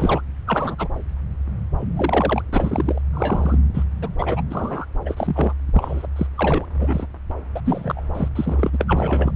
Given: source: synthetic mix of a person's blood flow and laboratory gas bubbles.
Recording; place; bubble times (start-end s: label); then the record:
Doppler ultrasound of blood flow; subclavian vein
0.00-0.22 s: bubbles
0.47-0.76 s: bubbles
0.78-0.89 s: bubbles
1.78-2.42 s: bubbles
2.52-3.01 s: bubbles
3.13-3.58 s: bubbles
3.73-3.83 s: bubbles
4.01-4.08 s: bubbles
4.18-4.42 s: bubbles
4.50-4.85 s: bubbles
5.05-5.54 s: bubbles
5.73-6.06 s: bubbles
6.16-6.27 s: bubbles
6.35-6.65 s: bubbles
6.79-7.06 s: bubbles
7.56-7.60 s: bubbles
7.65-8.03 s: bubbles
8.14-8.28 s: bubbles
8.35-9.32 s: bubbles
From the record:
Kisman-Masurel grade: 232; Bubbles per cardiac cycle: several, 3 to 8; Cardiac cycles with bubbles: 50 to 99%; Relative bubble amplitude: moderate (0.250 to 0.450); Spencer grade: 3 (all of the cardiac periods contain showers or single bubble signals, but not dominating or overriding the cardiac motion signals); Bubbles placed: anywhere in the cardiac cycle